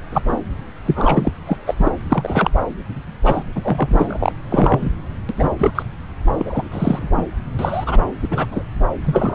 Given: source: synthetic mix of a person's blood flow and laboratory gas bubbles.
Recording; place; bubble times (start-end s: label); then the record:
Doppler ultrasound of blood flow; subclavian vein
0.12-0.24 s: bubbles
0.28-0.36 s: bubbles
0.85-1.31 s: bubbles
1.46-1.57 s: bubbles
1.66-1.75 s: bubbles
1.77-1.91 s: bubbles
2.09-2.50 s: bubbles
3.25-3.43 s: bubbles
3.55-4.32 s: bubbles
4.50-4.90 s: bubbles
5.29-5.33 s: bubbles
5.37-5.49 s: bubbles
5.58-5.71 s: bubbles
5.75-5.83 s: bubbles
6.39-6.68 s: bubbles
6.71-7.09 s: bubbles
7.15-7.22 s: bubbles
7.59-7.97 s: bubbles
8.22-8.28 s: bubbles
8.31-8.46 s: bubbles
8.51-8.62 s: bubbles
9.04-9.34 s: bubbles
From the record:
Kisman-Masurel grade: 243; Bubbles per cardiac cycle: several, 3 to 8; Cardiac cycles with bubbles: 100%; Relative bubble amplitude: loud (0.450 to 0.775); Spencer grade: 3 (all of the cardiac periods contain showers or single bubble signals, but not dominating or overriding the cardiac motion signals); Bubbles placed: anywhere in the cardiac cycle